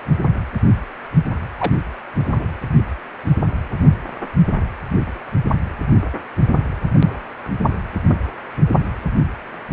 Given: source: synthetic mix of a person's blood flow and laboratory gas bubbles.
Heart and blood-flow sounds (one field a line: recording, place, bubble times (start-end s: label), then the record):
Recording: Doppler ultrasound of blood flow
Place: precordium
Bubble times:
1.58-1.73 s: bubbles
2.17-2.46 s: bubbles
From the record:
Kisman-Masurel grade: 122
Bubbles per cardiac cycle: 1 to 2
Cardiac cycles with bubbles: 10 to 50%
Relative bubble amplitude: moderate (0.250 to 0.450)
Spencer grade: 2 (many but less than half of the cardiac periods contain bubble signals, singularly or in groups)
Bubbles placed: anywhere in the cardiac cycle